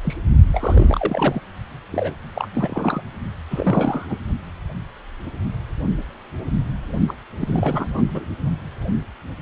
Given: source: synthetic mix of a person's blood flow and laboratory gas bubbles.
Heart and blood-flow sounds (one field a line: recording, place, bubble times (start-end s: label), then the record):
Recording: Doppler ultrasound of blood flow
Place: precordium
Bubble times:
0.04-0.16 s: bubbles
0.52-1.41 s: bubbles
1.92-2.15 s: bubbles
2.34-2.48 s: bubbles
2.52-3.02 s: bubbles
3.50-4.17 s: bubbles
7.08-7.14 s: bubbles
7.38-8.25 s: bubbles
From the record:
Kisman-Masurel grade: 332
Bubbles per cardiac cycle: rolling drumbeat, 9 or more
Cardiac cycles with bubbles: 50 to 99%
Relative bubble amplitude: moderate (0.250 to 0.450)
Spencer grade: 3 (all of the cardiac periods contain showers or single bubble signals, but not dominating or overriding the cardiac motion signals)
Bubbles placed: only in the low amplitude regions of the cardiac cycle